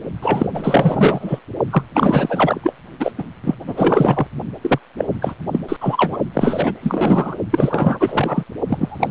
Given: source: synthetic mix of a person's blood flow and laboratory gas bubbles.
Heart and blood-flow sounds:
Doppler ultrasound of blood flow; precordium
0.22-0.50 s: bubbles
0.54-1.40 s: bubbles
1.70-1.83 s: bubbles
1.94-2.73 s: bubbles
3.00-3.12 s: bubbles
3.18-3.23 s: bubbles
3.44-3.55 s: bubbles
3.67-4.27 s: bubbles
4.61-4.79 s: bubbles
4.97-5.05 s: bubbles
5.21-5.34 s: bubbles
5.51-5.59 s: bubbles
5.69-5.76 s: bubbles
5.80-6.17 s: bubbles
6.33-7.36 s: bubbles
7.51-8.44 s: bubbles
8.67-9.11 s: bubbles
From the record:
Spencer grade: 4 (maximum detectable bubble signal sounding continuously throughout systole and diastole of every cardiac period, and overriding the amplitude of the normal cardiac signals); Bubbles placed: only in the low amplitude regions of the cardiac cycle

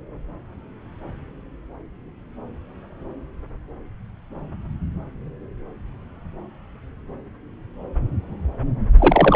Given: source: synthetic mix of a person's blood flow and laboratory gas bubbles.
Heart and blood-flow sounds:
Doppler ultrasound of blood flow; subclavian vein
8.98-9.36 s: bubbles
From the record:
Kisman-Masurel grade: 213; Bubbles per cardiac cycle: several, 3 to 8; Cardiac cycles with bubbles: 1 to 10%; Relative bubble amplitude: loud (0.450 to 0.775); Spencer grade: 1 (occasional bubble signal discernible with the cardiac motion signal, with majority of cardiac periods free of bubbles); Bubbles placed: anywhere in the cardiac cycle

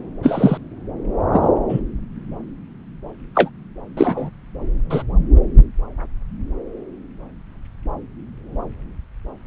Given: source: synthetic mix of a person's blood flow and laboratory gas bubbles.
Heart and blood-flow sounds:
Doppler ultrasound of blood flow; subclavian vein
0.22-0.57 s: bubbles
1.33-1.49 s: bubbles
1.69-1.80 s: bubbles
3.34-3.50 s: bubbles
3.97-4.30 s: bubbles
4.89-5.02 s: bubbles
From the record:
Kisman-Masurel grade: 123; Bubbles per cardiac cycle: 1 to 2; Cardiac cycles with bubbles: 10 to 50%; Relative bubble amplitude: loud (0.450 to 0.775); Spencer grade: 2 (many but less than half of the cardiac periods contain bubble signals, singularly or in groups); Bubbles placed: anywhere in the cardiac cycle

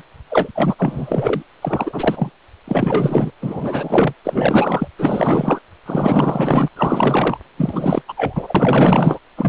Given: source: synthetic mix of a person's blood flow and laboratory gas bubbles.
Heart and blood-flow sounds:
Doppler ultrasound of blood flow; precordium
0.00-0.03 s: bubbles
0.30-0.49 s: bubbles
0.55-0.76 s: bubbles
0.78-1.42 s: bubbles
1.62-2.31 s: bubbles
2.68-3.31 s: bubbles
3.42-4.13 s: bubbles
4.24-4.88 s: bubbles
4.99-5.59 s: bubbles
5.86-6.68 s: bubbles
6.76-7.38 s: bubbles
7.57-8.02 s: bubbles
8.08-8.13 s: bubbles
8.17-9.19 s: bubbles
9.37-9.49 s: bubbles
From the record:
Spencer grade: 4 (maximum detectable bubble signal sounding continuously throughout systole and diastole of every cardiac period, and overriding the amplitude of the normal cardiac signals); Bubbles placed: anywhere in the cardiac cycle

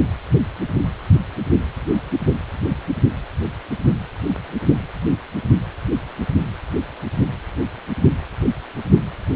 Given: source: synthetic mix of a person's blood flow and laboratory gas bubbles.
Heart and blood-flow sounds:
Doppler ultrasound of blood flow; precordium
no bubbles
From the record:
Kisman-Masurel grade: 000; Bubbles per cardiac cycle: 0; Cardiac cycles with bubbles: 0%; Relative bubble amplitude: no bubbles discernible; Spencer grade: 0 (complete lack of bubble signals)

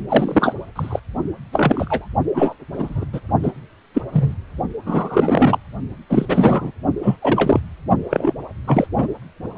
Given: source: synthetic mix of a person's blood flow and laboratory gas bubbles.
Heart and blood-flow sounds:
Doppler ultrasound of blood flow; precordium
0.09-0.55 s: bubbles
0.75-0.99 s: bubbles
1.52-2.07 s: bubbles
2.33-2.56 s: bubbles
2.73-3.05 s: bubbles
3.13-3.21 s: bubbles
3.42-3.52 s: bubbles
3.94-4.02 s: bubbles
4.12-4.35 s: bubbles
4.85-5.58 s: bubbles
6.09-6.71 s: bubbles
7.02-7.16 s: bubbles
7.22-7.60 s: bubbles
8.09-8.33 s: bubbles
8.66-8.87 s: bubbles
8.96-9.07 s: bubbles
From the record:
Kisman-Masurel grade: 243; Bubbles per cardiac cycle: several, 3 to 8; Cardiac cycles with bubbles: 100%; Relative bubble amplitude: loud (0.450 to 0.775); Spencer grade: 3 (all of the cardiac periods contain showers or single bubble signals, but not dominating or overriding the cardiac motion signals); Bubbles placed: only in the low amplitude regions of the cardiac cycle

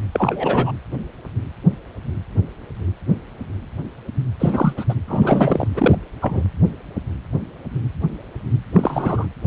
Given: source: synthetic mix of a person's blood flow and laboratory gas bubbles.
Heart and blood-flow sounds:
Doppler ultrasound of blood flow; precordium
0.11-0.71 s: bubbles
4.39-4.72 s: bubbles
4.76-4.85 s: bubbles
4.89-4.95 s: bubbles
5.07-5.68 s: bubbles
5.74-5.98 s: bubbles
6.21-6.43 s: bubbles
8.73-9.27 s: bubbles
From the record:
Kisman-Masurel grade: 223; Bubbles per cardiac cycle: several, 3 to 8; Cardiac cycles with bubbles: 10 to 50%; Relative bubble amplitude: loud (0.450 to 0.775); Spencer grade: 2 (many but less than half of the cardiac periods contain bubble signals, singularly or in groups); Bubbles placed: anywhere in the cardiac cycle

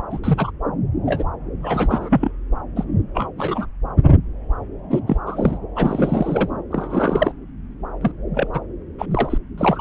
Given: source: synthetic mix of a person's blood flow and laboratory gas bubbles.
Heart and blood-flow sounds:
Doppler ultrasound of blood flow; subclavian vein
0.10-0.18 s: bubbles
0.24-0.51 s: bubbles
1.05-1.24 s: bubbles
1.61-2.31 s: bubbles
2.76-2.84 s: bubbles
3.14-3.30 s: bubbles
3.38-3.67 s: bubbles
4.90-5.00 s: bubbles
5.07-5.17 s: bubbles
5.26-5.58 s: bubbles
5.76-6.50 s: bubbles
6.71-7.32 s: bubbles
8.01-8.12 s: bubbles
8.34-8.47 s: bubbles
8.54-8.60 s: bubbles
8.99-9.06 s: bubbles
9.11-9.38 s: bubbles
9.58-9.81 s: bubbles
From the record:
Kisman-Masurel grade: 242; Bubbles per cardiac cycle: several, 3 to 8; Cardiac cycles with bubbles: 100%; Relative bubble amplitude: moderate (0.250 to 0.450); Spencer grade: 3 (all of the cardiac periods contain showers or single bubble signals, but not dominating or overriding the cardiac motion signals); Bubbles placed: anywhere in the cardiac cycle

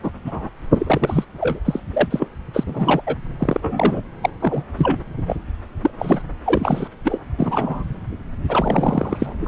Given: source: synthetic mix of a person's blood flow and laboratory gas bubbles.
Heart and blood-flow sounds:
Doppler ultrasound of blood flow; subclavian vein
0.03-0.11 s: bubbles
0.25-0.49 s: bubbles
0.71-1.25 s: bubbles
1.41-1.59 s: bubbles
1.65-1.80 s: bubbles
1.93-2.08 s: bubbles
2.10-2.28 s: bubbles
2.53-2.64 s: bubbles
2.67-3.01 s: bubbles
3.06-3.15 s: bubbles
3.38-4.02 s: bubbles
4.21-4.30 s: bubbles
4.42-4.64 s: bubbles
4.77-5.04 s: bubbles
5.26-5.36 s: bubbles
5.82-5.91 s: bubbles
5.98-6.22 s: bubbles
6.44-6.88 s: bubbles
7.04-7.21 s: bubbles
7.38-7.84 s: bubbles
8.49-9.34 s: bubbles
9.41-9.48 s: bubbles
From the record:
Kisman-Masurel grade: 242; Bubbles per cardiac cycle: several, 3 to 8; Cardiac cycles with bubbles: 100%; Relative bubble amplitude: moderate (0.250 to 0.450); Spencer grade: 3 (all of the cardiac periods contain showers or single bubble signals, but not dominating or overriding the cardiac motion signals); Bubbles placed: anywhere in the cardiac cycle

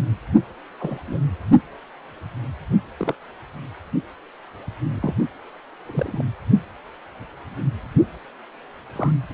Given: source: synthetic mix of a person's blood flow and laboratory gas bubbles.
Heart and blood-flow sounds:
Doppler ultrasound of blood flow; precordium
0.80-0.98 s: bubbles
1.08-1.17 s: bubbles
2.97-3.15 s: bubbles
4.94-5.14 s: bubbles
5.85-6.25 s: bubbles
8.96-9.12 s: bubbles
From the record:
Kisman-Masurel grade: 121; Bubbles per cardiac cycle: 1 to 2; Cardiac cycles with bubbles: 10 to 50%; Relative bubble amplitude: barely perceptible (0.100 to 0.250); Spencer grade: 2 (many but less than half of the cardiac periods contain bubble signals, singularly or in groups); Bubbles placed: only in the low amplitude regions of the cardiac cycle

